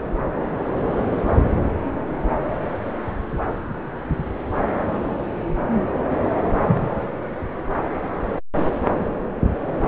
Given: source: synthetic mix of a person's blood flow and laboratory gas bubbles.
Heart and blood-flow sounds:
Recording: Doppler ultrasound of blood flow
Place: subclavian vein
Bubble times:
6.67-6.95 s: bubbles
From the record:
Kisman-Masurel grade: 113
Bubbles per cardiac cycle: 1 to 2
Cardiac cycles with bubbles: 1 to 10%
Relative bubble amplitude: loud (0.450 to 0.775)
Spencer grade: 1 (occasional bubble signal discernible with the cardiac motion signal, with majority of cardiac periods free of bubbles)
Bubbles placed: anywhere in the cardiac cycle

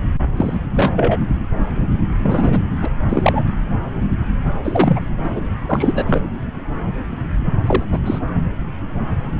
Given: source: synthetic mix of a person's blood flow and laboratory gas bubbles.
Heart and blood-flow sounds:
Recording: Doppler ultrasound of blood flow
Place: subclavian vein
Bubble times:
0.36-0.58 s: bubbles
0.76-1.20 s: bubbles
2.22-2.61 s: bubbles
2.82-2.89 s: bubbles
3.08-3.42 s: bubbles
4.64-5.00 s: bubbles
5.23-5.40 s: bubbles
5.68-5.93 s: bubbles
5.96-6.04 s: bubbles
6.06-6.21 s: bubbles
7.66-7.83 s: bubbles
7.91-7.99 s: bubbles
8.05-8.19 s: bubbles
From the record:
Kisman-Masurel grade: 223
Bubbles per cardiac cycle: several, 3 to 8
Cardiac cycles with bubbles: 10 to 50%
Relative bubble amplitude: loud (0.450 to 0.775)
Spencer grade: 2 (many but less than half of the cardiac periods contain bubble signals, singularly or in groups)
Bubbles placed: anywhere in the cardiac cycle

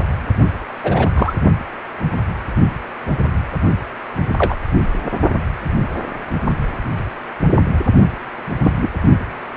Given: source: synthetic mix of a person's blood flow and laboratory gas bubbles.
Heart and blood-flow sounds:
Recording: Doppler ultrasound of blood flow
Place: precordium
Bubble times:
0.83-1.07 s: bubbles
1.15-1.33 s: bubbles
4.38-4.56 s: bubbles
8.63-8.73 s: bubbles
8.81-8.88 s: bubbles
From the record:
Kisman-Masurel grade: 123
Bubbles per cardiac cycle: 1 to 2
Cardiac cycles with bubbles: 10 to 50%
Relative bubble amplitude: loud (0.450 to 0.775)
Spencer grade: 2 (many but less than half of the cardiac periods contain bubble signals, singularly or in groups)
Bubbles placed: only in the low amplitude regions of the cardiac cycle

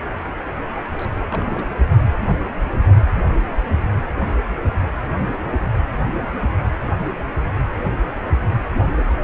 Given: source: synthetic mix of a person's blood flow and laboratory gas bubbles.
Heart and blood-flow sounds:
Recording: Doppler ultrasound of blood flow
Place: precordium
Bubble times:
0.94-1.06 s: bubbles
1.30-1.72 s: bubbles
From the record:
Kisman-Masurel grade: 221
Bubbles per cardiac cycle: several, 3 to 8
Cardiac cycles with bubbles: 10 to 50%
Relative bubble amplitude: barely perceptible (0.100 to 0.250)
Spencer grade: 2 (many but less than half of the cardiac periods contain bubble signals, singularly or in groups)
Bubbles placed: anywhere in the cardiac cycle

